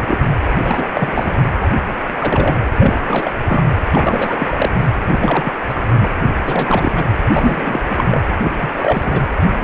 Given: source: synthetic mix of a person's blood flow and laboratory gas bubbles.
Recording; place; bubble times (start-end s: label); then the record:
Doppler ultrasound of blood flow; precordium
0.00-0.18 s: bubbles
0.60-1.36 s: bubbles
1.61-1.68 s: bubbles
1.71-1.76 s: bubbles
2.19-2.56 s: bubbles
2.77-2.94 s: bubbles
2.98-3.33 s: bubbles
3.46-3.64 s: bubbles
3.92-4.37 s: bubbles
4.39-4.70 s: bubbles
5.10-5.53 s: bubbles
5.69-5.74 s: bubbles
5.88-6.10 s: bubbles
6.46-7.05 s: bubbles
7.34-7.80 s: bubbles
7.89-8.20 s: bubbles
8.44-8.52 s: bubbles
8.61-8.70 s: bubbles
8.78-9.28 s: bubbles
From the record:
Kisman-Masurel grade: 342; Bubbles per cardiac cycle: rolling drumbeat, 9 or more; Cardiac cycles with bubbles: 100%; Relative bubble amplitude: moderate (0.250 to 0.450); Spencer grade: 3 (all of the cardiac periods contain showers or single bubble signals, but not dominating or overriding the cardiac motion signals); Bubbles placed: anywhere in the cardiac cycle